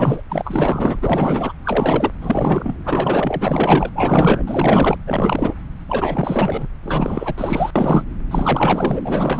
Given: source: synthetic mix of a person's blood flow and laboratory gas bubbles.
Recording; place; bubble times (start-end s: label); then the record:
Doppler ultrasound of blood flow; subclavian vein
0.00-0.23 s: bubbles
0.29-0.99 s: bubbles
1.02-1.52 s: bubbles
1.65-2.12 s: bubbles
2.21-2.74 s: bubbles
2.84-3.91 s: bubbles
3.95-4.44 s: bubbles
4.47-4.96 s: bubbles
5.07-5.54 s: bubbles
5.89-6.69 s: bubbles
6.83-7.71 s: bubbles
7.76-8.04 s: bubbles
8.31-9.40 s: bubbles
From the record:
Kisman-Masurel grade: 444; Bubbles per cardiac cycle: continuous sound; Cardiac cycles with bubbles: 100%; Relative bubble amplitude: maximal (0.775 to 0.999); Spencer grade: 4 (maximum detectable bubble signal sounding continuously throughout systole and diastole of every cardiac period, and overriding the amplitude of the normal cardiac signals); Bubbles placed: anywhere in the cardiac cycle